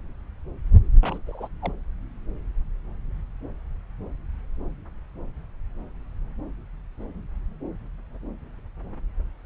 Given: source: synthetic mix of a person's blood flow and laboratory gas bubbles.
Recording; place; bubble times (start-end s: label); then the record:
Doppler ultrasound of blood flow; subclavian vein
1.03-1.18 s: bubbles
1.26-1.49 s: bubbles
1.61-1.72 s: bubbles
From the record:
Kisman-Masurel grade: 221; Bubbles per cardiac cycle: several, 3 to 8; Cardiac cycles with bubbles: 10 to 50%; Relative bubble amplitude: barely perceptible (0.100 to 0.250); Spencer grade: 2 (many but less than half of the cardiac periods contain bubble signals, singularly or in groups); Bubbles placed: anywhere in the cardiac cycle